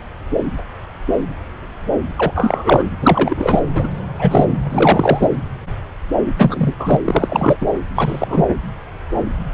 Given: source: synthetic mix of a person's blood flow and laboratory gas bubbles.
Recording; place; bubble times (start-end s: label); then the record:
Doppler ultrasound of blood flow; subclavian vein
2.17-2.33 s: bubbles
2.35-2.84 s: bubbles
3.00-3.64 s: bubbles
3.75-3.90 s: bubbles
4.18-4.52 s: bubbles
4.69-5.28 s: bubbles
6.38-6.74 s: bubbles
6.79-6.97 s: bubbles
7.04-7.58 s: bubbles
7.61-7.67 s: bubbles
7.95-8.46 s: bubbles
From the record:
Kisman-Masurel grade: 233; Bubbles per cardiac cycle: several, 3 to 8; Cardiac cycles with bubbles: 50 to 99%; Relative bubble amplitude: loud (0.450 to 0.775); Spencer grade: 3 (all of the cardiac periods contain showers or single bubble signals, but not dominating or overriding the cardiac motion signals); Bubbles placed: anywhere in the cardiac cycle